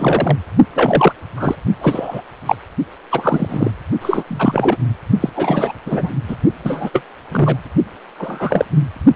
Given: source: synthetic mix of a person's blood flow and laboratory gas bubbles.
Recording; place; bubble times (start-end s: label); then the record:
Doppler ultrasound of blood flow; precordium
0.00-0.36 s: bubbles
0.71-1.12 s: bubbles
1.37-1.55 s: bubbles
1.80-2.22 s: bubbles
2.46-2.56 s: bubbles
3.10-3.71 s: bubbles
4.01-4.23 s: bubbles
4.27-4.77 s: bubbles
5.20-5.29 s: bubbles
5.35-5.72 s: bubbles
5.85-6.09 s: bubbles
6.27-6.36 s: bubbles
6.64-6.89 s: bubbles
6.92-7.04 s: bubbles
7.31-7.57 s: bubbles
8.18-8.65 s: bubbles
From the record:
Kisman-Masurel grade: 243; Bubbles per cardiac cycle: several, 3 to 8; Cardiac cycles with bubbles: 100%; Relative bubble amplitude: loud (0.450 to 0.775); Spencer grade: 3 (all of the cardiac periods contain showers or single bubble signals, but not dominating or overriding the cardiac motion signals); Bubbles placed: only in the low amplitude regions of the cardiac cycle